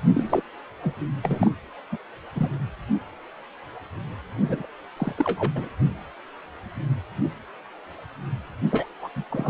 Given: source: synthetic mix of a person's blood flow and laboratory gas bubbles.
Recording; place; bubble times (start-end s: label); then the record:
Doppler ultrasound of blood flow; precordium
0.14-0.41 s: bubbles
0.82-0.95 s: bubbles
1.22-1.50 s: bubbles
1.91-1.97 s: bubbles
2.35-2.50 s: bubbles
4.45-4.66 s: bubbles
4.96-5.12 s: bubbles
5.17-5.53 s: bubbles
5.55-5.69 s: bubbles
8.71-8.87 s: bubbles
9.02-9.09 s: bubbles
9.16-9.23 s: bubbles
9.30-9.50 s: bubbles
From the record:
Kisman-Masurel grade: 221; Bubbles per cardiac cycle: several, 3 to 8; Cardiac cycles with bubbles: 10 to 50%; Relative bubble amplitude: barely perceptible (0.100 to 0.250); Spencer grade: 2 (many but less than half of the cardiac periods contain bubble signals, singularly or in groups); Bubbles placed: anywhere in the cardiac cycle